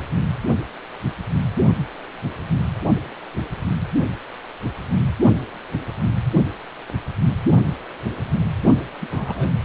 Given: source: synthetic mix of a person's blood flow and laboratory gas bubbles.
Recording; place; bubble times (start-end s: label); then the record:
Doppler ultrasound of blood flow; precordium
9.01-9.07 s: bubbles
9.11-9.51 s: bubbles
From the record:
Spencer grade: 2 (many but less than half of the cardiac periods contain bubble signals, singularly or in groups); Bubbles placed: only in the low amplitude regions of the cardiac cycle